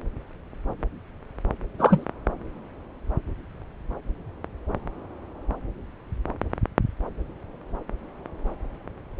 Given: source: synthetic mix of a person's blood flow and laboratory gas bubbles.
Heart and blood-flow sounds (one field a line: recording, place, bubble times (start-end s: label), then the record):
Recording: Doppler ultrasound of blood flow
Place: subclavian vein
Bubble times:
1.79-2.04 s: bubbles
From the record:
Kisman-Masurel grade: 113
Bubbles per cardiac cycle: 1 to 2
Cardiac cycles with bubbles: 1 to 10%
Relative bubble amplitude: loud (0.450 to 0.775)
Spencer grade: 1 (occasional bubble signal discernible with the cardiac motion signal, with majority of cardiac periods free of bubbles)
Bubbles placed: anywhere in the cardiac cycle